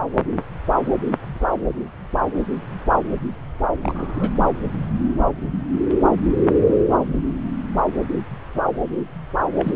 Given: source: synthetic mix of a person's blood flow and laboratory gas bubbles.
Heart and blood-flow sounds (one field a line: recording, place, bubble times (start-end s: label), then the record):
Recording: Doppler ultrasound of blood flow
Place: subclavian vein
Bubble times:
3.82-4.29 s: bubbles
9.55-9.75 s: bubbles
From the record:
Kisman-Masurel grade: 221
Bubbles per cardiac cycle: several, 3 to 8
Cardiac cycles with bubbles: 10 to 50%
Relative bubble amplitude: barely perceptible (0.100 to 0.250)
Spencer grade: 2 (many but less than half of the cardiac periods contain bubble signals, singularly or in groups)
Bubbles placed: anywhere in the cardiac cycle